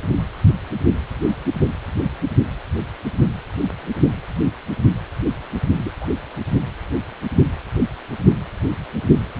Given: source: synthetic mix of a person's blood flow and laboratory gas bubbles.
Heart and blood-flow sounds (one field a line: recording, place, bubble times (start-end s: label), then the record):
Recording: Doppler ultrasound of blood flow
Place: precordium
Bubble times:
5.78-5.91 s: bubbles
6.01-6.06 s: bubbles
From the record:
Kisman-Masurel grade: 211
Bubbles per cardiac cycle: several, 3 to 8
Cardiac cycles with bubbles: 1 to 10%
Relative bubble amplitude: barely perceptible (0.100 to 0.250)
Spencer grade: 1 (occasional bubble signal discernible with the cardiac motion signal, with majority of cardiac periods free of bubbles)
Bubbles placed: only in the low amplitude regions of the cardiac cycle